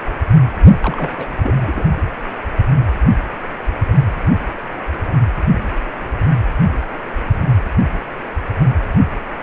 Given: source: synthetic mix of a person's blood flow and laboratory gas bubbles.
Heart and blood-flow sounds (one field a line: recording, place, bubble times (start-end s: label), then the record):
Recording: Doppler ultrasound of blood flow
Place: precordium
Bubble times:
0.80-1.11 s: bubbles
1.17-1.27 s: bubbles
1.43-1.89 s: bubbles
From the record:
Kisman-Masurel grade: 212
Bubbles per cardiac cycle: several, 3 to 8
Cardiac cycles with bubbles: 1 to 10%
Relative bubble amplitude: moderate (0.250 to 0.450)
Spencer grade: 1 (occasional bubble signal discernible with the cardiac motion signal, with majority of cardiac periods free of bubbles)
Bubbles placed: anywhere in the cardiac cycle